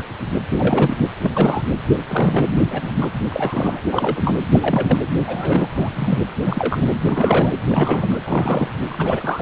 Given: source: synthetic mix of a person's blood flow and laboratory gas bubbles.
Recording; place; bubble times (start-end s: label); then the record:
Doppler ultrasound of blood flow; precordium
0.00-0.02 s: bubbles
0.52-0.97 s: bubbles
1.23-1.62 s: bubbles
2.07-2.49 s: bubbles
2.71-2.92 s: bubbles
2.95-3.10 s: bubbles
3.26-3.81 s: bubbles
3.91-4.35 s: bubbles
4.52-4.99 s: bubbles
5.27-5.68 s: bubbles
5.75-6.24 s: bubbles
6.45-6.98 s: bubbles
7.07-7.52 s: bubbles
7.68-8.19 s: bubbles
8.24-8.70 s: bubbles
8.88-9.42 s: bubbles
From the record:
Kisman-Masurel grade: 242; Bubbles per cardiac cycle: several, 3 to 8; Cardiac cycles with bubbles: 100%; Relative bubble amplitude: moderate (0.250 to 0.450); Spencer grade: 3 (all of the cardiac periods contain showers or single bubble signals, but not dominating or overriding the cardiac motion signals); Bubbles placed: anywhere in the cardiac cycle